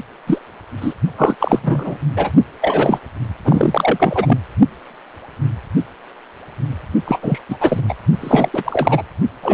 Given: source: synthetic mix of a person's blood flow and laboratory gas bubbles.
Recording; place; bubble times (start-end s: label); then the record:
Doppler ultrasound of blood flow; precordium
0.27-0.39 s: bubbles
0.80-0.94 s: bubbles
1.17-1.35 s: bubbles
1.40-1.99 s: bubbles
2.16-2.31 s: bubbles
2.62-2.99 s: bubbles
3.44-4.38 s: bubbles
7.06-7.41 s: bubbles
7.49-7.57 s: bubbles
7.60-7.81 s: bubbles
7.88-7.94 s: bubbles
8.21-8.49 s: bubbles
8.53-9.03 s: bubbles
9.42-9.54 s: bubbles
From the record:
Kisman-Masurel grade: 333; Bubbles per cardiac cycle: rolling drumbeat, 9 or more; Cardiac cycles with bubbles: 50 to 99%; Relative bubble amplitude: loud (0.450 to 0.775); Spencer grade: 3 (all of the cardiac periods contain showers or single bubble signals, but not dominating or overriding the cardiac motion signals); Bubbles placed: only in the low amplitude regions of the cardiac cycle